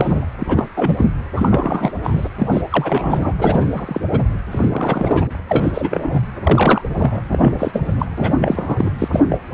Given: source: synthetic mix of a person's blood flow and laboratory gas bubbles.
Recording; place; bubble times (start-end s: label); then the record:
Doppler ultrasound of blood flow; precordium
0.00-0.23 s: bubbles
0.39-0.66 s: bubbles
0.74-1.09 s: bubbles
1.35-1.93 s: bubbles
2.03-2.28 s: bubbles
2.38-2.47 s: bubbles
2.51-2.61 s: bubbles
2.70-3.34 s: bubbles
3.38-4.01 s: bubbles
4.11-4.23 s: bubbles
4.51-5.35 s: bubbles
5.49-6.20 s: bubbles
6.43-6.82 s: bubbles
6.90-7.21 s: bubbles
7.31-7.81 s: bubbles
7.86-7.96 s: bubbles
7.98-8.05 s: bubbles
8.18-8.91 s: bubbles
8.98-9.09 s: bubbles
9.12-9.21 s: bubbles
9.30-9.38 s: bubbles
9.52-9.54 s: bubbles
From the record:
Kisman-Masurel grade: 343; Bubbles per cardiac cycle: rolling drumbeat, 9 or more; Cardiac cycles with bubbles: 100%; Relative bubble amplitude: loud (0.450 to 0.775); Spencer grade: 3 (all of the cardiac periods contain showers or single bubble signals, but not dominating or overriding the cardiac motion signals); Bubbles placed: anywhere in the cardiac cycle